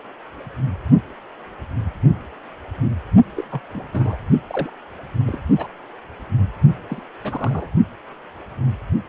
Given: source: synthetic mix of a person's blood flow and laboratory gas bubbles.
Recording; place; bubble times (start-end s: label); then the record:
Doppler ultrasound of blood flow; precordium
3.36-3.43 s: bubbles
3.51-3.60 s: bubbles
3.74-3.87 s: bubbles
3.93-4.17 s: bubbles
4.50-4.70 s: bubbles
5.27-5.38 s: bubbles
5.57-5.68 s: bubbles
6.88-7.03 s: bubbles
7.24-7.67 s: bubbles
From the record:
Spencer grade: 2 (many but less than half of the cardiac periods contain bubble signals, singularly or in groups); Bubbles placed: only in the low amplitude regions of the cardiac cycle